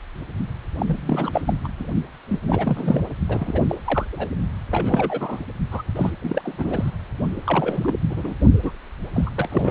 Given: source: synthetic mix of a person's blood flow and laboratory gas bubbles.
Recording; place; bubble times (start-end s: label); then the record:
Doppler ultrasound of blood flow; precordium
0.78-1.42 s: bubbles
1.46-1.54 s: bubbles
1.64-1.67 s: bubbles
1.79-1.85 s: bubbles
2.29-2.39 s: bubbles
2.48-3.01 s: bubbles
3.28-3.61 s: bubbles
3.69-3.75 s: bubbles
3.85-4.06 s: bubbles
4.12-4.29 s: bubbles
4.71-5.42 s: bubbles
5.71-5.82 s: bubbles
5.96-6.10 s: bubbles
6.22-6.91 s: bubbles
7.45-7.95 s: bubbles
8.09-8.35 s: bubbles
8.63-8.71 s: bubbles
9.13-9.30 s: bubbles
9.36-9.48 s: bubbles
9.51-9.70 s: bubbles
From the record:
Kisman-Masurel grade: 342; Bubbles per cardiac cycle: rolling drumbeat, 9 or more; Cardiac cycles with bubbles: 100%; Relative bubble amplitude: moderate (0.250 to 0.450); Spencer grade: 3 (all of the cardiac periods contain showers or single bubble signals, but not dominating or overriding the cardiac motion signals); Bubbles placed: only in the low amplitude regions of the cardiac cycle